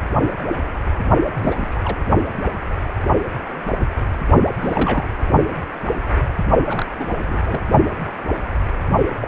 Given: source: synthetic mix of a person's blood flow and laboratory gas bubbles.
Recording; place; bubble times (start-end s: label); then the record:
Doppler ultrasound of blood flow; precordium
1.37-1.68 s: bubbles
1.71-1.81 s: bubbles
1.85-1.97 s: bubbles
4.61-5.05 s: bubbles
6.68-6.86 s: bubbles
6.99-7.43 s: bubbles
7.46-7.62 s: bubbles
9.21-9.28 s: bubbles
From the record:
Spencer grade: 2 (many but less than half of the cardiac periods contain bubble signals, singularly or in groups); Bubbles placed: only in the low amplitude regions of the cardiac cycle